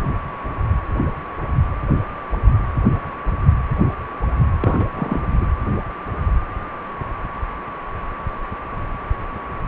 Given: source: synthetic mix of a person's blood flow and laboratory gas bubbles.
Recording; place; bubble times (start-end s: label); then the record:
Doppler ultrasound of blood flow; precordium
4.60-4.86 s: bubbles
4.95-5.21 s: bubbles
5.41-5.46 s: bubbles
From the record:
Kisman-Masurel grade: 222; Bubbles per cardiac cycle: several, 3 to 8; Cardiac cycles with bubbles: 10 to 50%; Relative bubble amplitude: moderate (0.250 to 0.450); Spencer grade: 2 (many but less than half of the cardiac periods contain bubble signals, singularly or in groups); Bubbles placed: anywhere in the cardiac cycle